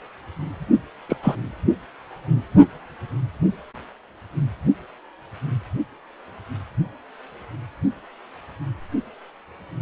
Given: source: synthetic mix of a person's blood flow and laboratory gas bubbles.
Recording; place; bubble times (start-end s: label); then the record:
Doppler ultrasound of blood flow; precordium
1.09-1.17 s: bubbles
1.23-1.35 s: bubbles
From the record:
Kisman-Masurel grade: 123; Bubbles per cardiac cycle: 1 to 2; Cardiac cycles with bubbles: 10 to 50%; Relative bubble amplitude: loud (0.450 to 0.775); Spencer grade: 2 (many but less than half of the cardiac periods contain bubble signals, singularly or in groups); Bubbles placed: only in the low amplitude regions of the cardiac cycle